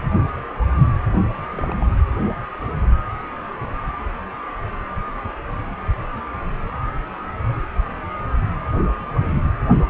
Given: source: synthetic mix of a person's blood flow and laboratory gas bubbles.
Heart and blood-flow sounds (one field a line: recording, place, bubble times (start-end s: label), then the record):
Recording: Doppler ultrasound of blood flow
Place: precordium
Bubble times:
1.12-1.20 s: bubbles
1.34-1.39 s: bubbles
1.50-1.76 s: bubbles
1.81-1.84 s: bubbles
From the record:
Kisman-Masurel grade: 211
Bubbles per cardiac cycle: several, 3 to 8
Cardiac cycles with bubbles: 1 to 10%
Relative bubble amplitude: barely perceptible (0.100 to 0.250)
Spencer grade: 1 (occasional bubble signal discernible with the cardiac motion signal, with majority of cardiac periods free of bubbles)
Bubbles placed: anywhere in the cardiac cycle